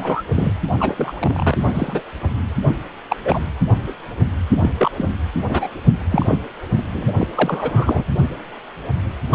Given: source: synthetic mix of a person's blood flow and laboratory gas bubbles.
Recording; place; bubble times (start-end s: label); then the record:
Doppler ultrasound of blood flow; precordium
0.00-0.23 s: bubbles
0.32-0.53 s: bubbles
0.79-1.56 s: bubbles
1.66-2.02 s: bubbles
3.09-3.16 s: bubbles
3.24-3.39 s: bubbles
4.61-4.72 s: bubbles
4.78-4.92 s: bubbles
4.96-5.09 s: bubbles
5.48-5.67 s: bubbles
6.11-6.38 s: bubbles
6.78-6.83 s: bubbles
6.94-7.27 s: bubbles
7.35-8.04 s: bubbles
9.31-9.35 s: bubbles
From the record:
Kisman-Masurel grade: 232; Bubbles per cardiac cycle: several, 3 to 8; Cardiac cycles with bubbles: 50 to 99%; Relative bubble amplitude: moderate (0.250 to 0.450); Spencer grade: 3 (all of the cardiac periods contain showers or single bubble signals, but not dominating or overriding the cardiac motion signals); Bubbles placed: anywhere in the cardiac cycle